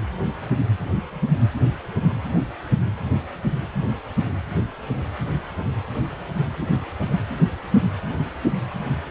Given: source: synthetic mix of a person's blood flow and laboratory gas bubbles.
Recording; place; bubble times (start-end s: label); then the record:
Doppler ultrasound of blood flow; precordium
no bubbles
From the record:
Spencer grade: 0 (complete lack of bubble signals)